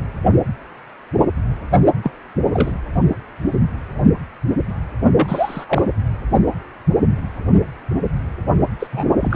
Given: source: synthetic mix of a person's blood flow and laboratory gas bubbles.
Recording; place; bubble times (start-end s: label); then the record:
Doppler ultrasound of blood flow; precordium
2.04-2.11 s: bubbles
2.54-2.73 s: bubbles
5.16-5.65 s: bubbles
5.69-5.92 s: bubbles
8.79-8.87 s: bubbles
8.92-9.05 s: bubbles
9.20-9.36 s: bubbles
From the record:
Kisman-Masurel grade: 232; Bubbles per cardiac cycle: several, 3 to 8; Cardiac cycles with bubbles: 50 to 99%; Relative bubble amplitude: moderate (0.250 to 0.450); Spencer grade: 3 (all of the cardiac periods contain showers or single bubble signals, but not dominating or overriding the cardiac motion signals); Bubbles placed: anywhere in the cardiac cycle